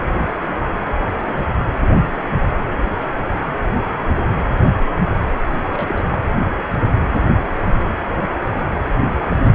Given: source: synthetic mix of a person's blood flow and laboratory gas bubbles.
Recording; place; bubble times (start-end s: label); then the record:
Doppler ultrasound of blood flow; precordium
5.71-6.18 s: bubbles
From the record:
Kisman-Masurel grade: 211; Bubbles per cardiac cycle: several, 3 to 8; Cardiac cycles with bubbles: 1 to 10%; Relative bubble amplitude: barely perceptible (0.100 to 0.250); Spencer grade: 1 (occasional bubble signal discernible with the cardiac motion signal, with majority of cardiac periods free of bubbles); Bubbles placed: anywhere in the cardiac cycle